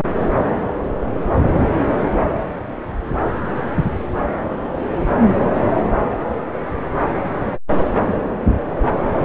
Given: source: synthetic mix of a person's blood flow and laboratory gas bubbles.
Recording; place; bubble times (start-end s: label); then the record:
Doppler ultrasound of blood flow; subclavian vein
3.36-3.40 s: bubbles
3.57-3.62 s: bubbles
From the record:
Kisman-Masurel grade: 111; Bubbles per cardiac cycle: 1 to 2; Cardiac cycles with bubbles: 1 to 10%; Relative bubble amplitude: barely perceptible (0.100 to 0.250); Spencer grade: 1 (occasional bubble signal discernible with the cardiac motion signal, with majority of cardiac periods free of bubbles); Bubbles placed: anywhere in the cardiac cycle